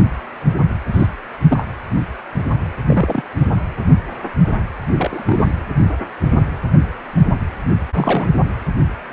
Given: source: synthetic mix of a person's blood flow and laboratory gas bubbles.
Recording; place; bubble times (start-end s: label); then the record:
Doppler ultrasound of blood flow; precordium
0.93-1.06 s: bubbles
1.49-1.65 s: bubbles
2.88-3.21 s: bubbles
3.40-3.46 s: bubbles
4.98-5.54 s: bubbles
7.94-8.32 s: bubbles
From the record:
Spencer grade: 2 (many but less than half of the cardiac periods contain bubble signals, singularly or in groups); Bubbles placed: anywhere in the cardiac cycle